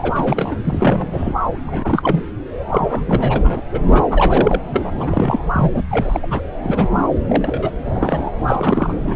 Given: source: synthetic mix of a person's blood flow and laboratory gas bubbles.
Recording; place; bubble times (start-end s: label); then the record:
Doppler ultrasound of blood flow; subclavian vein
0.00-0.56 s: bubbles
0.65-1.08 s: bubbles
1.12-1.33 s: bubbles
1.44-2.21 s: bubbles
2.72-3.60 s: bubbles
3.72-3.81 s: bubbles
3.86-4.01 s: bubbles
4.09-4.61 s: bubbles
4.73-4.92 s: bubbles
4.98-5.40 s: bubbles
5.52-5.82 s: bubbles
5.90-6.27 s: bubbles
6.30-6.40 s: bubbles
6.62-6.89 s: bubbles
7.28-7.71 s: bubbles
7.86-8.30 s: bubbles
8.47-9.16 s: bubbles
From the record:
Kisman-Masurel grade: 342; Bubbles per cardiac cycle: rolling drumbeat, 9 or more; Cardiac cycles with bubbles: 100%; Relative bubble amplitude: moderate (0.250 to 0.450); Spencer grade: 3 (all of the cardiac periods contain showers or single bubble signals, but not dominating or overriding the cardiac motion signals); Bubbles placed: anywhere in the cardiac cycle